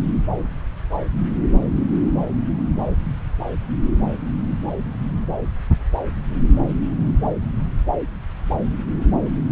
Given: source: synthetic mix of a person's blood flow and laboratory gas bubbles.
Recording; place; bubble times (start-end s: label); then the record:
Doppler ultrasound of blood flow; subclavian vein
no bubbles
From the record:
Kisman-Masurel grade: 000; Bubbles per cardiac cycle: 0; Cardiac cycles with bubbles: 0%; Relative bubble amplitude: no bubbles discernible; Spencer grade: 0 (complete lack of bubble signals)